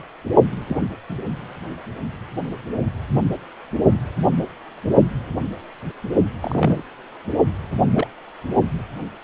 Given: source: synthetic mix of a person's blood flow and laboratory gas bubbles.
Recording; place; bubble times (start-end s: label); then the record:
Doppler ultrasound of blood flow; precordium
0.69-0.77 s: bubbles
1.09-1.16 s: bubbles
6.42-6.82 s: bubbles
7.93-8.07 s: bubbles
From the record:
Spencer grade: 2 (many but less than half of the cardiac periods contain bubble signals, singularly or in groups); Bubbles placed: only in the low amplitude regions of the cardiac cycle